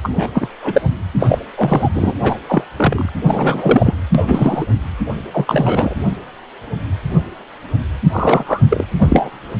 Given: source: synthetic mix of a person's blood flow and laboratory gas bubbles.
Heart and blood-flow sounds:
Doppler ultrasound of blood flow; precordium
0.03-0.30 s: bubbles
0.33-0.48 s: bubbles
0.61-0.82 s: bubbles
1.19-1.39 s: bubbles
1.56-1.90 s: bubbles
1.94-2.15 s: bubbles
2.23-2.39 s: bubbles
2.49-2.64 s: bubbles
2.77-3.09 s: bubbles
3.27-3.95 s: bubbles
4.15-4.23 s: bubbles
4.27-4.67 s: bubbles
5.33-5.95 s: bubbles
8.13-8.63 s: bubbles
8.70-8.86 s: bubbles
8.97-9.30 s: bubbles
From the record:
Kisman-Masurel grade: 233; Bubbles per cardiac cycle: several, 3 to 8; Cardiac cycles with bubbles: 50 to 99%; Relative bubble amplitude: loud (0.450 to 0.775); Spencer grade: 3 (all of the cardiac periods contain showers or single bubble signals, but not dominating or overriding the cardiac motion signals); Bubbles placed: anywhere in the cardiac cycle

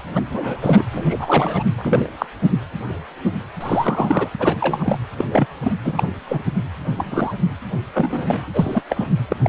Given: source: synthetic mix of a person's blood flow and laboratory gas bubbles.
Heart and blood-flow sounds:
Doppler ultrasound of blood flow; precordium
0.15-0.21 s: bubbles
0.31-0.83 s: bubbles
0.91-1.63 s: bubbles
1.78-2.10 s: bubbles
2.19-2.25 s: bubbles
3.60-4.28 s: bubbles
4.39-4.56 s: bubbles
4.60-4.96 s: bubbles
5.18-5.24 s: bubbles
5.30-5.46 s: bubbles
5.63-5.72 s: bubbles
5.84-6.12 s: bubbles
6.28-6.42 s: bubbles
6.96-7.34 s: bubbles
7.93-8.45 s: bubbles
8.54-8.83 s: bubbles
8.89-9.07 s: bubbles
9.29-9.36 s: bubbles
9.44-9.49 s: bubbles
From the record:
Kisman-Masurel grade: 232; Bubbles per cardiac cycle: several, 3 to 8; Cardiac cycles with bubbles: 50 to 99%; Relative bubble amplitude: moderate (0.250 to 0.450); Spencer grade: 3 (all of the cardiac periods contain showers or single bubble signals, but not dominating or overriding the cardiac motion signals); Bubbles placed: anywhere in the cardiac cycle

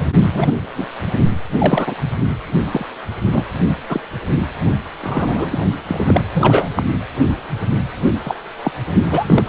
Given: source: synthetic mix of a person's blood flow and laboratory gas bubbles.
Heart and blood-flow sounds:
Doppler ultrasound of blood flow; precordium
0.32-0.53 s: bubbles
0.76-0.87 s: bubbles
1.58-1.94 s: bubbles
2.71-2.85 s: bubbles
3.32-3.45 s: bubbles
3.89-4.01 s: bubbles
5.02-5.58 s: bubbles
5.87-6.30 s: bubbles
6.33-6.69 s: bubbles
6.76-6.83 s: bubbles
8.25-8.35 s: bubbles
8.63-8.71 s: bubbles
9.09-9.44 s: bubbles
From the record:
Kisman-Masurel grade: 243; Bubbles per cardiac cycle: several, 3 to 8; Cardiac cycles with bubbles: 100%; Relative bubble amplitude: loud (0.450 to 0.775); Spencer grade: 3 (all of the cardiac periods contain showers or single bubble signals, but not dominating or overriding the cardiac motion signals); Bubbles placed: only in the low amplitude regions of the cardiac cycle

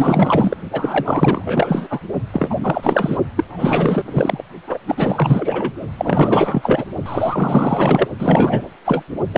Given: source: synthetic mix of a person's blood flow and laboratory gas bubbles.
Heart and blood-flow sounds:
Doppler ultrasound of blood flow; precordium
0.00-0.57 s: bubbles
0.72-2.00 s: bubbles
2.33-2.55 s: bubbles
2.61-3.17 s: bubbles
3.35-3.44 s: bubbles
3.48-4.42 s: bubbles
4.67-4.77 s: bubbles
4.86-5.73 s: bubbles
5.97-6.86 s: bubbles
7.05-8.06 s: bubbles
8.19-8.63 s: bubbles
8.85-9.03 s: bubbles
9.33-9.38 s: bubbles
From the record:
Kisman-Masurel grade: 444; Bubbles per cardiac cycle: continuous sound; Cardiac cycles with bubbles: 100%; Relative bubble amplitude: maximal (0.775 to 0.999); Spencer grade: 4 (maximum detectable bubble signal sounding continuously throughout systole and diastole of every cardiac period, and overriding the amplitude of the normal cardiac signals); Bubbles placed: only in the low amplitude regions of the cardiac cycle

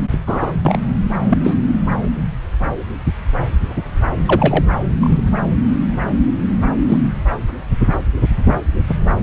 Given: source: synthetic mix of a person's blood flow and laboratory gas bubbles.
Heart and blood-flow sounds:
Doppler ultrasound of blood flow; subclavian vein
0.27-0.52 s: bubbles
0.65-0.78 s: bubbles
1.29-1.38 s: bubbles
1.43-1.56 s: bubbles
4.25-4.64 s: bubbles
5.00-5.21 s: bubbles
6.88-6.97 s: bubbles
8.88-8.95 s: bubbles
From the record:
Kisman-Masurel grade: 123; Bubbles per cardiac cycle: 1 to 2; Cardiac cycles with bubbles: 10 to 50%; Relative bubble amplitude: loud (0.450 to 0.775); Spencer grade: 2 (many but less than half of the cardiac periods contain bubble signals, singularly or in groups); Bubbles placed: anywhere in the cardiac cycle

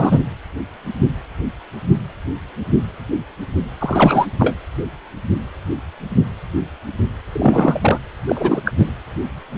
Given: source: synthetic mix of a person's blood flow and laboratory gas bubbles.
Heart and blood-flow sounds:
Doppler ultrasound of blood flow; precordium
0.00-0.21 s: bubbles
3.79-4.26 s: bubbles
4.39-4.54 s: bubbles
7.32-7.99 s: bubbles
8.28-8.62 s: bubbles
8.65-8.73 s: bubbles
8.78-8.92 s: bubbles
From the record:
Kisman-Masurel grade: 223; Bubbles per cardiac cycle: several, 3 to 8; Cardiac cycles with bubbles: 10 to 50%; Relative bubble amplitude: loud (0.450 to 0.775); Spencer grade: 2 (many but less than half of the cardiac periods contain bubble signals, singularly or in groups); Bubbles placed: anywhere in the cardiac cycle

